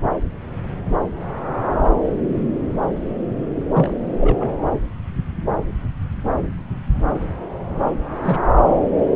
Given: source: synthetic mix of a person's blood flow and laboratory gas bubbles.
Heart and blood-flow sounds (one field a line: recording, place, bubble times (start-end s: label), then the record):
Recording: Doppler ultrasound of blood flow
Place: subclavian vein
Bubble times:
3.74-3.96 s: bubbles
4.20-4.54 s: bubbles
8.24-8.39 s: bubbles
From the record:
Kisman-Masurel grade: 212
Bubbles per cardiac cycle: several, 3 to 8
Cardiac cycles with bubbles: 1 to 10%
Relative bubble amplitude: moderate (0.250 to 0.450)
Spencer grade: 1 (occasional bubble signal discernible with the cardiac motion signal, with majority of cardiac periods free of bubbles)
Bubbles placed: anywhere in the cardiac cycle